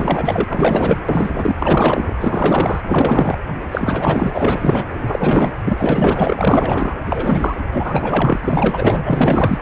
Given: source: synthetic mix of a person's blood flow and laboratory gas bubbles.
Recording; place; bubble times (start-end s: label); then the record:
Doppler ultrasound of blood flow; precordium
0.00-0.45 s: bubbles
0.47-1.01 s: bubbles
1.08-1.55 s: bubbles
1.59-2.13 s: bubbles
2.20-2.81 s: bubbles
2.89-3.38 s: bubbles
3.71-4.30 s: bubbles
4.33-4.85 s: bubbles
4.98-5.52 s: bubbles
5.64-6.94 s: bubbles
7.06-7.56 s: bubbles
7.73-8.41 s: bubbles
8.44-9.58 s: bubbles
From the record:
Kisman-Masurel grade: 444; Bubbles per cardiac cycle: continuous sound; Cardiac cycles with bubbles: 100%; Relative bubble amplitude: maximal (0.775 to 0.999); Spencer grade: 4 (maximum detectable bubble signal sounding continuously throughout systole and diastole of every cardiac period, and overriding the amplitude of the normal cardiac signals); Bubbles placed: anywhere in the cardiac cycle